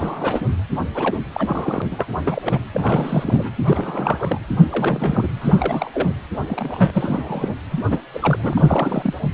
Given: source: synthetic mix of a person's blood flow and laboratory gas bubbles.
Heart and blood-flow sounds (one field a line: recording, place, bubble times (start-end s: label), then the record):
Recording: Doppler ultrasound of blood flow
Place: precordium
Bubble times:
0.00-0.46 s: bubbles
0.95-1.18 s: bubbles
1.34-1.82 s: bubbles
1.91-2.06 s: bubbles
2.25-2.58 s: bubbles
2.72-3.52 s: bubbles
3.66-4.41 s: bubbles
4.58-5.28 s: bubbles
5.41-5.91 s: bubbles
5.93-6.12 s: bubbles
6.49-7.54 s: bubbles
7.71-7.81 s: bubbles
7.89-8.00 s: bubbles
8.13-9.14 s: bubbles
From the record:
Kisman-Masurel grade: 342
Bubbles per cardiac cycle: rolling drumbeat, 9 or more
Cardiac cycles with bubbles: 100%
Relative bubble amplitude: moderate (0.250 to 0.450)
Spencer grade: 3 (all of the cardiac periods contain showers or single bubble signals, but not dominating or overriding the cardiac motion signals)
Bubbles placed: anywhere in the cardiac cycle